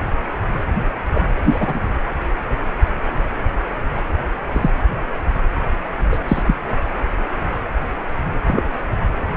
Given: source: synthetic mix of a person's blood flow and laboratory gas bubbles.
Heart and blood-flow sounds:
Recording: Doppler ultrasound of blood flow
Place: precordium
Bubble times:
1.14-1.21 s: bubbles
1.44-1.80 s: bubbles
4.52-4.70 s: bubbles
6.11-6.19 s: bubbles
6.28-6.42 s: bubbles
6.46-6.55 s: bubbles
8.47-8.62 s: bubbles
From the record:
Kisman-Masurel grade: 123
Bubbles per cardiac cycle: 1 to 2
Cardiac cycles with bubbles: 10 to 50%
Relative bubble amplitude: loud (0.450 to 0.775)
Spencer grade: 2 (many but less than half of the cardiac periods contain bubble signals, singularly or in groups)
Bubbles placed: anywhere in the cardiac cycle

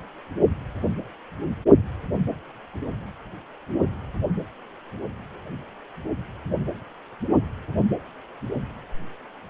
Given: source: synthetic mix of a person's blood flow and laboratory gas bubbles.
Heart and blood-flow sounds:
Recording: Doppler ultrasound of blood flow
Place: precordium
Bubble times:
no bubbles
From the record:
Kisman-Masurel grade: 000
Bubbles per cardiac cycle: 0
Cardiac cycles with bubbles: 0%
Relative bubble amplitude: no bubbles discernible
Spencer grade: 0 (complete lack of bubble signals)

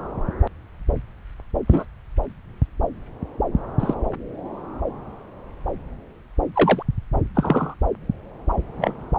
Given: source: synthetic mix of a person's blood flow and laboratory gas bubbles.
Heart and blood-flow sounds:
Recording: Doppler ultrasound of blood flow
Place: subclavian vein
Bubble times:
1.67-1.85 s: bubbles
3.79-3.95 s: bubbles
6.54-6.83 s: bubbles
7.35-7.74 s: bubbles
8.80-8.94 s: bubbles
From the record:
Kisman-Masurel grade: 123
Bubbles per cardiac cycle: 1 to 2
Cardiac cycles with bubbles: 10 to 50%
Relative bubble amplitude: loud (0.450 to 0.775)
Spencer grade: 2 (many but less than half of the cardiac periods contain bubble signals, singularly or in groups)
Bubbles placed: anywhere in the cardiac cycle

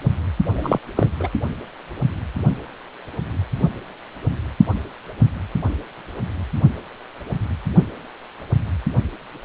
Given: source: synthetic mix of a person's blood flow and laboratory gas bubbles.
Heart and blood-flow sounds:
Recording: Doppler ultrasound of blood flow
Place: precordium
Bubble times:
0.52-0.79 s: bubbles
0.96-1.10 s: bubbles
1.20-1.29 s: bubbles
From the record:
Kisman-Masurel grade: 212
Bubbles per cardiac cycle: several, 3 to 8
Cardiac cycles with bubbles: 1 to 10%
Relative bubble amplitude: moderate (0.250 to 0.450)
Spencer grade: 1 (occasional bubble signal discernible with the cardiac motion signal, with majority of cardiac periods free of bubbles)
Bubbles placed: only in the low amplitude regions of the cardiac cycle

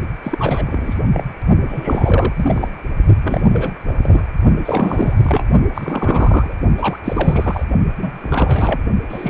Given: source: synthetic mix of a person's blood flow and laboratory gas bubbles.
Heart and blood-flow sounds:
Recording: Doppler ultrasound of blood flow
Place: precordium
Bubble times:
0.22-0.98 s: bubbles
1.13-1.23 s: bubbles
1.67-2.32 s: bubbles
2.36-2.68 s: bubbles
3.21-3.49 s: bubbles
3.52-3.73 s: bubbles
3.86-4.24 s: bubbles
4.65-5.45 s: bubbles
5.74-6.54 s: bubbles
6.77-6.99 s: bubbles
7.04-7.65 s: bubbles
7.98-8.18 s: bubbles
8.21-8.81 s: bubbles
9.09-9.30 s: bubbles
From the record:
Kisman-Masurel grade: 343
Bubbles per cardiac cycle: rolling drumbeat, 9 or more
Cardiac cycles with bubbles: 100%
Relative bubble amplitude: loud (0.450 to 0.775)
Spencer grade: 3 (all of the cardiac periods contain showers or single bubble signals, but not dominating or overriding the cardiac motion signals)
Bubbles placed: only in the low amplitude regions of the cardiac cycle

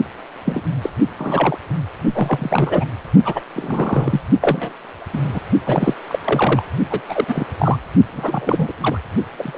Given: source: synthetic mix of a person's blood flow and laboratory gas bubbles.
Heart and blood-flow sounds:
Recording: Doppler ultrasound of blood flow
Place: precordium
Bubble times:
0.45-0.61 s: bubbles
0.81-0.90 s: bubbles
1.18-1.56 s: bubbles
2.12-2.85 s: bubbles
3.25-3.42 s: bubbles
3.56-4.21 s: bubbles
4.41-4.74 s: bubbles
5.13-5.19 s: bubbles
5.23-5.40 s: bubbles
5.64-5.94 s: bubbles
6.08-6.19 s: bubbles
6.24-6.63 s: bubbles
6.90-7.01 s: bubbles
7.09-7.25 s: bubbles
7.28-7.47 s: bubbles
7.58-7.78 s: bubbles
8.12-8.73 s: bubbles
8.81-8.98 s: bubbles
9.38-9.58 s: bubbles
From the record:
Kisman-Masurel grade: 242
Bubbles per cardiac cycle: several, 3 to 8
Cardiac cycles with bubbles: 100%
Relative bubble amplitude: moderate (0.250 to 0.450)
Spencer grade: 3 (all of the cardiac periods contain showers or single bubble signals, but not dominating or overriding the cardiac motion signals)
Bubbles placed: only in the low amplitude regions of the cardiac cycle

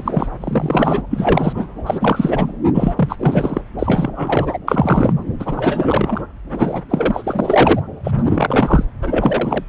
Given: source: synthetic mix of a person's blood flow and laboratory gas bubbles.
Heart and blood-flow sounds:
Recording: Doppler ultrasound of blood flow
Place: subclavian vein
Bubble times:
0.00-0.28 s: bubbles
0.40-1.02 s: bubbles
1.10-1.67 s: bubbles
1.86-2.52 s: bubbles
2.74-3.16 s: bubbles
3.19-3.61 s: bubbles
3.78-4.58 s: bubbles
4.67-5.13 s: bubbles
5.39-6.21 s: bubbles
6.51-6.82 s: bubbles
6.89-7.81 s: bubbles
8.04-8.12 s: bubbles
8.16-8.85 s: bubbles
9.02-9.64 s: bubbles
From the record:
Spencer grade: 3 (all of the cardiac periods contain showers or single bubble signals, but not dominating or overriding the cardiac motion signals)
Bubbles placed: anywhere in the cardiac cycle

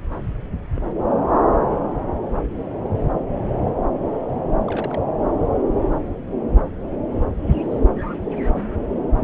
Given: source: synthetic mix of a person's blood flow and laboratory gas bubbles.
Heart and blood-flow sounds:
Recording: Doppler ultrasound of blood flow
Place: subclavian vein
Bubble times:
0.75-0.80 s: bubbles
1.38-1.42 s: bubbles
4.67-5.01 s: bubbles
7.49-7.86 s: bubbles
From the record:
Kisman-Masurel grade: 121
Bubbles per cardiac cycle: 1 to 2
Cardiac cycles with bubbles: 10 to 50%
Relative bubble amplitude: barely perceptible (0.100 to 0.250)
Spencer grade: 2 (many but less than half of the cardiac periods contain bubble signals, singularly or in groups)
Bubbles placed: anywhere in the cardiac cycle

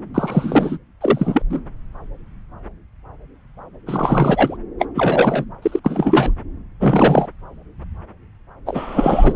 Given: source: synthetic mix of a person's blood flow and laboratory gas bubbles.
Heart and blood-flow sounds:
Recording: Doppler ultrasound of blood flow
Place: subclavian vein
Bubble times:
0.14-0.78 s: bubbles
1.00-1.42 s: bubbles
1.49-1.60 s: bubbles
3.87-4.57 s: bubbles
4.79-4.86 s: bubbles
4.95-5.45 s: bubbles
5.62-5.79 s: bubbles
5.84-6.31 s: bubbles
6.80-7.27 s: bubbles
8.66-9.36 s: bubbles
From the record:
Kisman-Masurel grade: 333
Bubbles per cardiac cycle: rolling drumbeat, 9 or more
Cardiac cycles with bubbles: 50 to 99%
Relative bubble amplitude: loud (0.450 to 0.775)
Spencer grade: 3 (all of the cardiac periods contain showers or single bubble signals, but not dominating or overriding the cardiac motion signals)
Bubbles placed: anywhere in the cardiac cycle

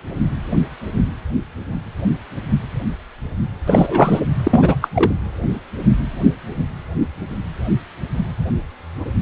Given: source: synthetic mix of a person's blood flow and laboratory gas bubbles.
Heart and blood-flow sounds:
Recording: Doppler ultrasound of blood flow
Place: precordium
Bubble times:
3.67-4.21 s: bubbles
4.43-4.75 s: bubbles
4.81-4.88 s: bubbles
4.94-5.12 s: bubbles
From the record:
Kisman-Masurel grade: 223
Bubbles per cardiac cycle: several, 3 to 8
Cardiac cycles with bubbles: 10 to 50%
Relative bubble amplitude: loud (0.450 to 0.775)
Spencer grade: 2 (many but less than half of the cardiac periods contain bubble signals, singularly or in groups)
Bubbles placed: anywhere in the cardiac cycle

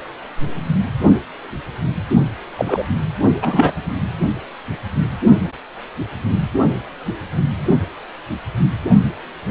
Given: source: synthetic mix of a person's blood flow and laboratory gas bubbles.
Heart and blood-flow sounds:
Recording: Doppler ultrasound of blood flow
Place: precordium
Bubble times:
2.57-2.83 s: bubbles
3.41-3.72 s: bubbles
From the record:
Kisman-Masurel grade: 213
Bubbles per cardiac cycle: several, 3 to 8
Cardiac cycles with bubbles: 1 to 10%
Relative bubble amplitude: loud (0.450 to 0.775)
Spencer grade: 1 (occasional bubble signal discernible with the cardiac motion signal, with majority of cardiac periods free of bubbles)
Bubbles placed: only in the low amplitude regions of the cardiac cycle

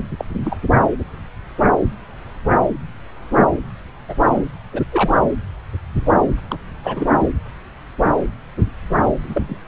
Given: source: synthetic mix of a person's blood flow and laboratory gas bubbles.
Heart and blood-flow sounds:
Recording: Doppler ultrasound of blood flow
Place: subclavian vein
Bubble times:
0.17-0.24 s: bubbles
0.43-0.56 s: bubbles
4.08-4.16 s: bubbles
4.27-4.50 s: bubbles
4.73-4.82 s: bubbles
4.91-5.15 s: bubbles
6.49-6.58 s: bubbles
6.83-7.19 s: bubbles
9.23-9.59 s: bubbles
From the record:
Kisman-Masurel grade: 222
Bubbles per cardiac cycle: several, 3 to 8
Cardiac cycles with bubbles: 10 to 50%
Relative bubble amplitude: moderate (0.250 to 0.450)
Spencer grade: 2 (many but less than half of the cardiac periods contain bubble signals, singularly or in groups)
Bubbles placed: anywhere in the cardiac cycle

